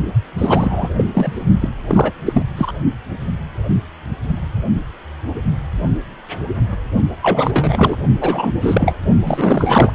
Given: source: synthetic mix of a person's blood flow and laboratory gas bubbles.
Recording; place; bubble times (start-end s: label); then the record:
Doppler ultrasound of blood flow; precordium
0.38-0.90 s: bubbles
0.97-1.05 s: bubbles
1.14-1.44 s: bubbles
1.60-1.70 s: bubbles
1.87-2.12 s: bubbles
2.25-2.42 s: bubbles
2.57-2.73 s: bubbles
7.22-7.97 s: bubbles
8.21-8.52 s: bubbles
8.61-8.96 s: bubbles
9.24-9.95 s: bubbles
From the record:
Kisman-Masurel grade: 333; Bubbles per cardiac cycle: rolling drumbeat, 9 or more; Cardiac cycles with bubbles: 50 to 99%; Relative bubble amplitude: loud (0.450 to 0.775); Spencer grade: 3 (all of the cardiac periods contain showers or single bubble signals, but not dominating or overriding the cardiac motion signals); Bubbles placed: only in the low amplitude regions of the cardiac cycle